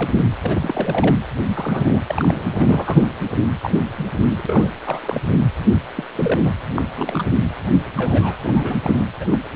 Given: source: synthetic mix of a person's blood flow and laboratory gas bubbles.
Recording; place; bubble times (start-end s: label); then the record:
Doppler ultrasound of blood flow; precordium
0.00-0.14 s: bubbles
0.41-1.16 s: bubbles
1.55-2.00 s: bubbles
2.06-2.47 s: bubbles
2.51-3.08 s: bubbles
3.62-3.78 s: bubbles
3.96-4.07 s: bubbles
4.37-4.69 s: bubbles
4.84-4.99 s: bubbles
5.02-5.21 s: bubbles
5.96-6.04 s: bubbles
6.15-6.51 s: bubbles
6.76-6.82 s: bubbles
6.95-7.23 s: bubbles
7.97-8.76 s: bubbles
8.84-9.07 s: bubbles
9.20-9.39 s: bubbles
From the record:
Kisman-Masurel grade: 242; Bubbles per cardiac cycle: several, 3 to 8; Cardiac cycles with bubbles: 100%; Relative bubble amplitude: moderate (0.250 to 0.450); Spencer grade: 3 (all of the cardiac periods contain showers or single bubble signals, but not dominating or overriding the cardiac motion signals); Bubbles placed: anywhere in the cardiac cycle